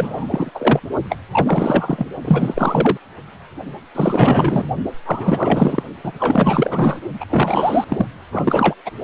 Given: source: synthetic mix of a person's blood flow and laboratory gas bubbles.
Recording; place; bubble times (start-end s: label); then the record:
Doppler ultrasound of blood flow; precordium
0.00-0.50 s: bubbles
0.54-0.79 s: bubbles
1.09-1.18 s: bubbles
1.32-2.07 s: bubbles
2.25-2.98 s: bubbles
3.95-4.63 s: bubbles
5.05-5.83 s: bubbles
6.04-7.00 s: bubbles
7.20-7.25 s: bubbles
7.29-7.84 s: bubbles
7.88-8.06 s: bubbles
8.32-8.74 s: bubbles
8.85-8.91 s: bubbles
From the record:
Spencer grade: 4 (maximum detectable bubble signal sounding continuously throughout systole and diastole of every cardiac period, and overriding the amplitude of the normal cardiac signals); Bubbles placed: only in the low amplitude regions of the cardiac cycle